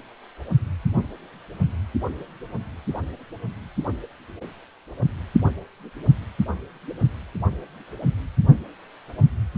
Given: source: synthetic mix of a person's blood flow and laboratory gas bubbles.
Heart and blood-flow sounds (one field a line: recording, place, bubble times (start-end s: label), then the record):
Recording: Doppler ultrasound of blood flow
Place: precordium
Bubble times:
no bubbles
From the record:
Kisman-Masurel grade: 000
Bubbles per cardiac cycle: 0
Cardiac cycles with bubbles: 0%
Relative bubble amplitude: no bubbles discernible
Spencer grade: 0 (complete lack of bubble signals)